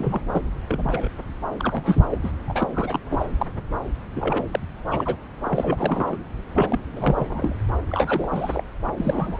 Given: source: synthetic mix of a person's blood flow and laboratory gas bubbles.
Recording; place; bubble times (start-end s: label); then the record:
Doppler ultrasound of blood flow; subclavian vein
0.00-0.21 s: bubbles
0.32-0.42 s: bubbles
0.69-1.08 s: bubbles
1.59-2.01 s: bubbles
2.10-2.18 s: bubbles
2.24-2.31 s: bubbles
2.48-2.68 s: bubbles
2.74-3.00 s: bubbles
3.10-3.28 s: bubbles
3.39-3.46 s: bubbles
4.16-4.44 s: bubbles
4.53-4.59 s: bubbles
4.91-5.17 s: bubbles
5.46-6.17 s: bubbles
6.56-6.79 s: bubbles
6.96-7.27 s: bubbles
7.29-7.55 s: bubbles
7.89-8.63 s: bubbles
8.97-9.39 s: bubbles
From the record:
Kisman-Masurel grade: 242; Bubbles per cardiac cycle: several, 3 to 8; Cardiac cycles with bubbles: 100%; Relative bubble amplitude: moderate (0.250 to 0.450); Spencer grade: 3 (all of the cardiac periods contain showers or single bubble signals, but not dominating or overriding the cardiac motion signals); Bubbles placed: anywhere in the cardiac cycle